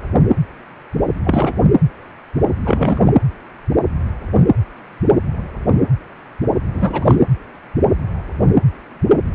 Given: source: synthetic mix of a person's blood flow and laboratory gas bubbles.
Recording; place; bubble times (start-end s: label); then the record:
Doppler ultrasound of blood flow; precordium
1.24-1.55 s: bubbles
2.63-3.13 s: bubbles
6.73-7.17 s: bubbles
From the record:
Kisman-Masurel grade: 223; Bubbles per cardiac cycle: several, 3 to 8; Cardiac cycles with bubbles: 10 to 50%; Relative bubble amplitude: loud (0.450 to 0.775); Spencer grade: 2 (many but less than half of the cardiac periods contain bubble signals, singularly or in groups); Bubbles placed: anywhere in the cardiac cycle